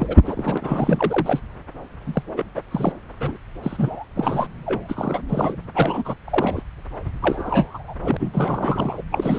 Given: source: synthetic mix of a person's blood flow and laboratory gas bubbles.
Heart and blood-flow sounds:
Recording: Doppler ultrasound of blood flow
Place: subclavian vein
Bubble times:
0.00-0.16 s: bubbles
0.25-0.57 s: bubbles
0.60-1.40 s: bubbles
2.06-2.23 s: bubbles
2.36-2.44 s: bubbles
2.56-2.61 s: bubbles
2.71-2.93 s: bubbles
3.20-3.37 s: bubbles
3.63-4.04 s: bubbles
4.15-4.47 s: bubbles
4.65-5.21 s: bubbles
5.28-5.55 s: bubbles
5.75-6.14 s: bubbles
6.24-6.62 s: bubbles
7.22-7.94 s: bubbles
8.01-8.17 s: bubbles
8.20-8.31 s: bubbles
8.33-9.02 s: bubbles
9.12-9.39 s: bubbles
From the record:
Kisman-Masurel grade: 342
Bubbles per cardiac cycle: rolling drumbeat, 9 or more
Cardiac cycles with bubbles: 100%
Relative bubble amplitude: moderate (0.250 to 0.450)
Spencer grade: 3 (all of the cardiac periods contain showers or single bubble signals, but not dominating or overriding the cardiac motion signals)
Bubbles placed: anywhere in the cardiac cycle

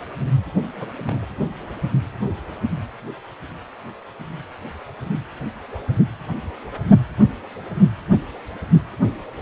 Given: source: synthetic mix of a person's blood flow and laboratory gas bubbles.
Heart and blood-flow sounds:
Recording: Doppler ultrasound of blood flow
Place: precordium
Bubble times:
0.80-0.86 s: bubbles
1.07-1.26 s: bubbles
From the record:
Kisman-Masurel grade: 111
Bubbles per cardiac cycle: 1 to 2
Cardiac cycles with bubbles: 1 to 10%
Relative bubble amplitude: barely perceptible (0.100 to 0.250)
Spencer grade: 1 (occasional bubble signal discernible with the cardiac motion signal, with majority of cardiac periods free of bubbles)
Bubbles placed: anywhere in the cardiac cycle

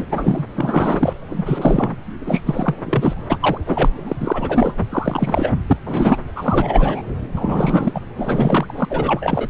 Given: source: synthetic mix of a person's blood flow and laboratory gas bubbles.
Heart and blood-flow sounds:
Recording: Doppler ultrasound of blood flow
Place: subclavian vein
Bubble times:
0.00-0.46 s: bubbles
0.55-1.14 s: bubbles
1.29-1.95 s: bubbles
2.26-2.42 s: bubbles
2.46-2.75 s: bubbles
2.86-3.13 s: bubbles
3.29-3.58 s: bubbles
3.67-3.90 s: bubbles
4.07-4.16 s: bubbles
4.20-4.73 s: bubbles
4.78-4.87 s: bubbles
4.92-5.52 s: bubbles
5.67-5.77 s: bubbles
5.86-6.18 s: bubbles
6.36-7.02 s: bubbles
7.35-8.00 s: bubbles
8.17-8.85 s: bubbles
8.89-9.48 s: bubbles
From the record:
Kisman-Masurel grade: 343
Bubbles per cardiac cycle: rolling drumbeat, 9 or more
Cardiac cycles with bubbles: 100%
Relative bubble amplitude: loud (0.450 to 0.775)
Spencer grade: 3 (all of the cardiac periods contain showers or single bubble signals, but not dominating or overriding the cardiac motion signals)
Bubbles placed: anywhere in the cardiac cycle

